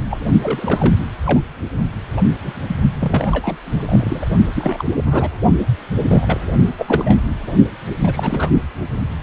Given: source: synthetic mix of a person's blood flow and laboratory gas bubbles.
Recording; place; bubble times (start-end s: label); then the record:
Doppler ultrasound of blood flow; precordium
0.10-0.18 s: bubbles
0.42-0.95 s: bubbles
1.26-1.40 s: bubbles
2.17-2.21 s: bubbles
2.42-2.53 s: bubbles
2.67-2.76 s: bubbles
2.99-3.56 s: bubbles
3.65-4.28 s: bubbles
4.54-4.84 s: bubbles
5.05-5.30 s: bubbles
6.08-6.38 s: bubbles
6.77-7.18 s: bubbles
7.47-7.52 s: bubbles
8.04-8.49 s: bubbles
From the record:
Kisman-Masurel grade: 242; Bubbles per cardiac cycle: several, 3 to 8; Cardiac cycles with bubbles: 100%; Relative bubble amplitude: moderate (0.250 to 0.450); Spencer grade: 3 (all of the cardiac periods contain showers or single bubble signals, but not dominating or overriding the cardiac motion signals); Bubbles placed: only in the low amplitude regions of the cardiac cycle